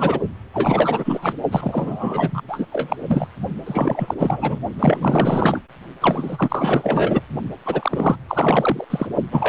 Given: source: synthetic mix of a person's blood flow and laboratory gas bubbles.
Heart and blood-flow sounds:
Doppler ultrasound of blood flow; precordium
0.00-0.20 s: bubbles
0.53-1.34 s: bubbles
1.51-2.42 s: bubbles
2.48-2.65 s: bubbles
2.70-2.97 s: bubbles
3.08-3.27 s: bubbles
3.66-4.15 s: bubbles
4.19-4.58 s: bubbles
4.79-5.60 s: bubbles
6.01-7.23 s: bubbles
7.65-8.15 s: bubbles
8.28-8.84 s: bubbles
8.90-9.06 s: bubbles
9.31-9.49 s: bubbles
From the record:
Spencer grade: 4 (maximum detectable bubble signal sounding continuously throughout systole and diastole of every cardiac period, and overriding the amplitude of the normal cardiac signals); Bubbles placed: only in the low amplitude regions of the cardiac cycle

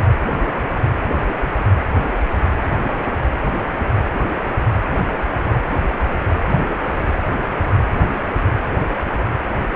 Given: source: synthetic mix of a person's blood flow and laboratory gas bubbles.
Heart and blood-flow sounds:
Doppler ultrasound of blood flow; precordium
no bubbles
From the record:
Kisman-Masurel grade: 000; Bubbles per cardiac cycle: 0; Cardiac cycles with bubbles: 0%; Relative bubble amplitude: no bubbles discernible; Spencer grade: 0 (complete lack of bubble signals)

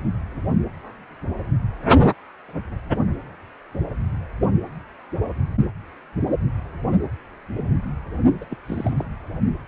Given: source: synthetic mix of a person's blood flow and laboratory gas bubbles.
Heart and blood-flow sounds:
Doppler ultrasound of blood flow; precordium
8.41-8.45 s: bubbles
8.50-8.56 s: bubbles
8.65-8.94 s: bubbles
8.96-9.06 s: bubbles
From the record:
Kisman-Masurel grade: 211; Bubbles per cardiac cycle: several, 3 to 8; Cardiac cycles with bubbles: 1 to 10%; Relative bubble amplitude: barely perceptible (0.100 to 0.250); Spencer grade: 1 (occasional bubble signal discernible with the cardiac motion signal, with majority of cardiac periods free of bubbles); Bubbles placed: only in the low amplitude regions of the cardiac cycle

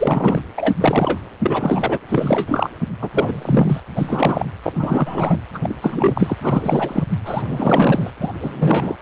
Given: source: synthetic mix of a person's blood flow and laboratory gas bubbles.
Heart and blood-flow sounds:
Doppler ultrasound of blood flow; precordium
0.00-0.41 s: bubbles
0.56-0.75 s: bubbles
0.80-1.19 s: bubbles
1.42-1.98 s: bubbles
2.08-2.71 s: bubbles
3.01-3.80 s: bubbles
3.96-4.46 s: bubbles
4.63-5.41 s: bubbles
5.54-5.59 s: bubbles
5.63-5.76 s: bubbles
5.81-6.37 s: bubbles
6.42-7.03 s: bubbles
7.25-8.11 s: bubbles
8.20-8.31 s: bubbles
8.40-8.96 s: bubbles
From the record:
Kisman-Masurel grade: 343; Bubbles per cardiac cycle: rolling drumbeat, 9 or more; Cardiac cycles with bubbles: 100%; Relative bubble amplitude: loud (0.450 to 0.775); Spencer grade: 3 (all of the cardiac periods contain showers or single bubble signals, but not dominating or overriding the cardiac motion signals); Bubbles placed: anywhere in the cardiac cycle

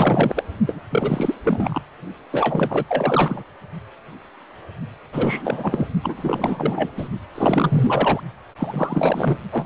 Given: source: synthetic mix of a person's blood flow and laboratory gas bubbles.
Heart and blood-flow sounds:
Doppler ultrasound of blood flow; precordium
0.00-0.43 s: bubbles
0.67-0.83 s: bubbles
0.90-1.34 s: bubbles
1.43-1.82 s: bubbles
2.31-2.85 s: bubbles
2.87-3.44 s: bubbles
5.12-5.87 s: bubbles
6.03-6.91 s: bubbles
6.96-7.08 s: bubbles
7.34-8.21 s: bubbles
8.57-9.38 s: bubbles
9.52-9.65 s: bubbles
From the record:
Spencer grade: 4 (maximum detectable bubble signal sounding continuously throughout systole and diastole of every cardiac period, and overriding the amplitude of the normal cardiac signals); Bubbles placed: only in the low amplitude regions of the cardiac cycle

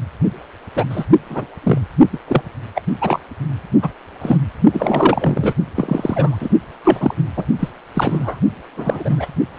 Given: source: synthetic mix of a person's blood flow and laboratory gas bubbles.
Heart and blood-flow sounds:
Doppler ultrasound of blood flow; precordium
0.75-0.85 s: bubbles
0.89-1.04 s: bubbles
1.29-1.45 s: bubbles
1.63-1.79 s: bubbles
2.12-2.19 s: bubbles
2.27-2.43 s: bubbles
2.75-2.81 s: bubbles
3.01-3.20 s: bubbles
3.82-3.89 s: bubbles
4.21-4.39 s: bubbles
4.73-5.53 s: bubbles
5.75-6.50 s: bubbles
6.84-7.14 s: bubbles
7.36-7.44 s: bubbles
7.59-7.68 s: bubbles
7.94-8.40 s: bubbles
8.77-9.27 s: bubbles
9.54-9.58 s: bubbles
From the record:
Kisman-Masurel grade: 243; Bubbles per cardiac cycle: several, 3 to 8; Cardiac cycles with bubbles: 100%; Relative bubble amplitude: loud (0.450 to 0.775); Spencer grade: 3 (all of the cardiac periods contain showers or single bubble signals, but not dominating or overriding the cardiac motion signals); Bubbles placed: only in the low amplitude regions of the cardiac cycle

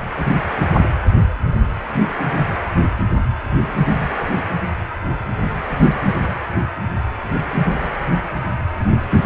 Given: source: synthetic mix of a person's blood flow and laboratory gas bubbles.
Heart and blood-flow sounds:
Doppler ultrasound of blood flow; precordium
8.79-8.85 s: bubbles
9.11-9.26 s: bubbles
From the record:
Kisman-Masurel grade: 111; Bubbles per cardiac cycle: 1 to 2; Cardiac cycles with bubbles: 1 to 10%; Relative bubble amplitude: barely perceptible (0.100 to 0.250); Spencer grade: 1 (occasional bubble signal discernible with the cardiac motion signal, with majority of cardiac periods free of bubbles); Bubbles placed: anywhere in the cardiac cycle

